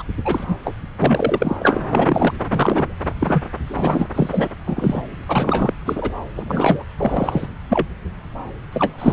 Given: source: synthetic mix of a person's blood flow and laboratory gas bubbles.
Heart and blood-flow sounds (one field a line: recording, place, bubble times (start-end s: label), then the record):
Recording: Doppler ultrasound of blood flow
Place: subclavian vein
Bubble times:
0.00-0.03 s: bubbles
0.24-0.44 s: bubbles
0.47-0.56 s: bubbles
0.64-0.75 s: bubbles
1.02-1.57 s: bubbles
1.59-1.83 s: bubbles
1.88-2.32 s: bubbles
2.50-2.97 s: bubbles
3.20-3.43 s: bubbles
3.67-4.08 s: bubbles
4.13-4.49 s: bubbles
4.67-5.02 s: bubbles
5.28-5.73 s: bubbles
5.85-6.12 s: bubbles
6.37-6.83 s: bubbles
6.97-7.47 s: bubbles
7.69-7.87 s: bubbles
8.72-8.93 s: bubbles
8.98-9.13 s: bubbles
From the record:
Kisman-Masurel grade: 233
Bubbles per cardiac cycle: several, 3 to 8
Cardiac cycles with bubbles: 50 to 99%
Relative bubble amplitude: loud (0.450 to 0.775)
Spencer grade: 3 (all of the cardiac periods contain showers or single bubble signals, but not dominating or overriding the cardiac motion signals)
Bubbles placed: anywhere in the cardiac cycle